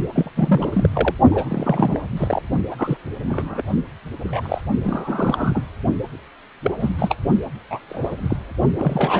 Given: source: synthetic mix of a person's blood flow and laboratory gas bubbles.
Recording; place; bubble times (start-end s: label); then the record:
Doppler ultrasound of blood flow; precordium
0.14-0.30 s: bubbles
0.36-0.88 s: bubbles
0.93-1.15 s: bubbles
1.31-2.00 s: bubbles
2.17-2.42 s: bubbles
2.71-2.76 s: bubbles
2.79-2.97 s: bubbles
3.29-3.62 s: bubbles
4.18-4.62 s: bubbles
4.83-5.62 s: bubbles
6.62-6.71 s: bubbles
6.80-6.89 s: bubbles
6.99-7.15 s: bubbles
7.70-7.79 s: bubbles
7.89-8.37 s: bubbles
8.79-9.20 s: bubbles
From the record:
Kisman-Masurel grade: 242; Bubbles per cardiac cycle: several, 3 to 8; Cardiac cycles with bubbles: 100%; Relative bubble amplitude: moderate (0.250 to 0.450); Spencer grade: 3 (all of the cardiac periods contain showers or single bubble signals, but not dominating or overriding the cardiac motion signals); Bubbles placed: only in the low amplitude regions of the cardiac cycle